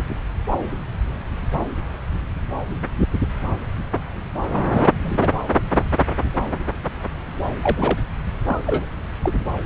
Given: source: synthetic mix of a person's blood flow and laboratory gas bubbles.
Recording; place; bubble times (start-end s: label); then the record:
Doppler ultrasound of blood flow; subclavian vein
4.72-4.83 s: bubbles
4.90-5.29 s: bubbles
7.59-7.98 s: bubbles
8.45-8.61 s: bubbles
8.66-8.86 s: bubbles
9.22-9.33 s: bubbles
From the record:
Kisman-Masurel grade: 232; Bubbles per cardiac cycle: several, 3 to 8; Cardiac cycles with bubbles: 50 to 99%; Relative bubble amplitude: moderate (0.250 to 0.450); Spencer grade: 3 (all of the cardiac periods contain showers or single bubble signals, but not dominating or overriding the cardiac motion signals); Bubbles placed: anywhere in the cardiac cycle